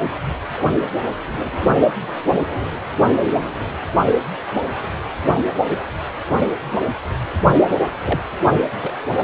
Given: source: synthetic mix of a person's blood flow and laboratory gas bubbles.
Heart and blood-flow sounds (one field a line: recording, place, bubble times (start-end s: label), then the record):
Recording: Doppler ultrasound of blood flow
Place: precordium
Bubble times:
8.04-8.20 s: bubbles
8.81-8.92 s: bubbles
From the record:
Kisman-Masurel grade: 122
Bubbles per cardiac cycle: 1 to 2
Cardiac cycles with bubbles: 10 to 50%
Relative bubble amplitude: moderate (0.250 to 0.450)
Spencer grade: 2 (many but less than half of the cardiac periods contain bubble signals, singularly or in groups)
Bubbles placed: only in the low amplitude regions of the cardiac cycle